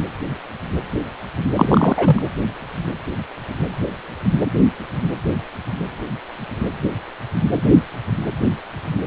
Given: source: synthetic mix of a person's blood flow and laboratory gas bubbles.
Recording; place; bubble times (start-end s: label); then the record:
Doppler ultrasound of blood flow; precordium
1.56-2.22 s: bubbles
From the record:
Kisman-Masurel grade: 213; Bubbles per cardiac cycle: several, 3 to 8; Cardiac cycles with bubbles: 1 to 10%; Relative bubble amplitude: loud (0.450 to 0.775); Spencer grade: 1 (occasional bubble signal discernible with the cardiac motion signal, with majority of cardiac periods free of bubbles); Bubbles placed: anywhere in the cardiac cycle